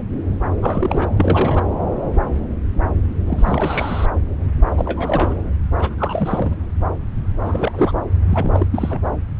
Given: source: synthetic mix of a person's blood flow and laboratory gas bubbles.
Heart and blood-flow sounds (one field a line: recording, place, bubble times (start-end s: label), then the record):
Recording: Doppler ultrasound of blood flow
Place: subclavian vein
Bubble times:
0.00-0.04 s: bubbles
0.61-1.06 s: bubbles
1.17-1.68 s: bubbles
3.26-4.06 s: bubbles
4.77-5.34 s: bubbles
5.78-5.95 s: bubbles
5.98-6.57 s: bubbles
7.43-7.92 s: bubbles
8.29-8.66 s: bubbles
8.71-9.00 s: bubbles
From the record:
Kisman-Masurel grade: 332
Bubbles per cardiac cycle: rolling drumbeat, 9 or more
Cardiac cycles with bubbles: 50 to 99%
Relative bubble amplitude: moderate (0.250 to 0.450)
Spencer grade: 3 (all of the cardiac periods contain showers or single bubble signals, but not dominating or overriding the cardiac motion signals)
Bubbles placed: anywhere in the cardiac cycle